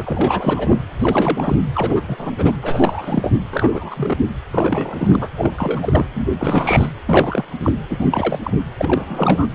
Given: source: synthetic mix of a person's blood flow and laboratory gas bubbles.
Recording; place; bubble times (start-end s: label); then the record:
Doppler ultrasound of blood flow; precordium
0.00-0.80 s: bubbles
0.99-1.58 s: bubbles
1.75-2.31 s: bubbles
2.38-2.52 s: bubbles
2.62-3.32 s: bubbles
3.51-4.17 s: bubbles
4.50-5.29 s: bubbles
5.37-6.06 s: bubbles
6.13-6.28 s: bubbles
6.38-6.90 s: bubbles
7.07-7.45 s: bubbles
7.59-7.72 s: bubbles
7.90-8.39 s: bubbles
8.44-8.60 s: bubbles
8.78-9.47 s: bubbles
From the record:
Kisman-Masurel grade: 343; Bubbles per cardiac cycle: rolling drumbeat, 9 or more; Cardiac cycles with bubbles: 100%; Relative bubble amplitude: loud (0.450 to 0.775); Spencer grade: 3 (all of the cardiac periods contain showers or single bubble signals, but not dominating or overriding the cardiac motion signals); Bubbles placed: anywhere in the cardiac cycle